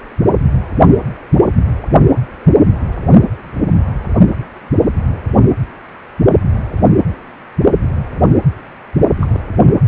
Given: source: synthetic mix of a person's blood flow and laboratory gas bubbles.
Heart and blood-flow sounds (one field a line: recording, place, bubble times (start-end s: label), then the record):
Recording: Doppler ultrasound of blood flow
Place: precordium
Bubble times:
9.15-9.41 s: bubbles
9.75-9.83 s: bubbles
From the record:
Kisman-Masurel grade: 211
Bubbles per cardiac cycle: several, 3 to 8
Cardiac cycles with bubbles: 1 to 10%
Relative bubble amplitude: barely perceptible (0.100 to 0.250)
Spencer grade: 1 (occasional bubble signal discernible with the cardiac motion signal, with majority of cardiac periods free of bubbles)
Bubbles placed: only in the low amplitude regions of the cardiac cycle